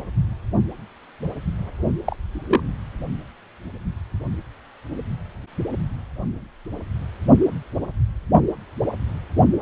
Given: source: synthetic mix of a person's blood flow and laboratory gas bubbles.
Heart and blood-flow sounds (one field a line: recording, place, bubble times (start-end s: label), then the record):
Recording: Doppler ultrasound of blood flow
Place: precordium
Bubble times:
2.05-2.17 s: bubbles
2.33-2.62 s: bubbles
From the record:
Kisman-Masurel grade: 112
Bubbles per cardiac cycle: 1 to 2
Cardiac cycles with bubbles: 1 to 10%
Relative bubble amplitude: moderate (0.250 to 0.450)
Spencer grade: 1 (occasional bubble signal discernible with the cardiac motion signal, with majority of cardiac periods free of bubbles)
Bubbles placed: only in the low amplitude regions of the cardiac cycle